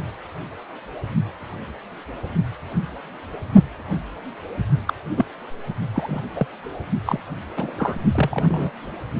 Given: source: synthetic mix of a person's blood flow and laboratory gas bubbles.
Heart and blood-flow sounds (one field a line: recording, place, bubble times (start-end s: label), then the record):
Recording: Doppler ultrasound of blood flow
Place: precordium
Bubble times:
4.87-4.94 s: bubbles
5.16-5.25 s: bubbles
5.94-6.22 s: bubbles
6.36-6.47 s: bubbles
7.05-7.20 s: bubbles
7.57-7.71 s: bubbles
7.77-7.95 s: bubbles
8.14-8.71 s: bubbles
From the record:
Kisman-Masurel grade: 222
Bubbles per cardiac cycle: several, 3 to 8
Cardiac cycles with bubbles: 10 to 50%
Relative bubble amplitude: moderate (0.250 to 0.450)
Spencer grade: 2 (many but less than half of the cardiac periods contain bubble signals, singularly or in groups)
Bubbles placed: only in the low amplitude regions of the cardiac cycle